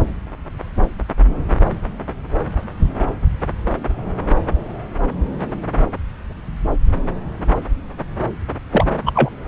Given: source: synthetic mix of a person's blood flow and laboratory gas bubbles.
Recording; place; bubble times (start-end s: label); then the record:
Doppler ultrasound of blood flow; subclavian vein
8.72-8.86 s: bubbles
9.06-9.12 s: bubbles
9.14-9.30 s: bubbles
From the record:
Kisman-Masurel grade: 223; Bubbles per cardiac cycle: several, 3 to 8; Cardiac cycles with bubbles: 10 to 50%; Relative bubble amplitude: loud (0.450 to 0.775); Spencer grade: 2 (many but less than half of the cardiac periods contain bubble signals, singularly or in groups); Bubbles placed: anywhere in the cardiac cycle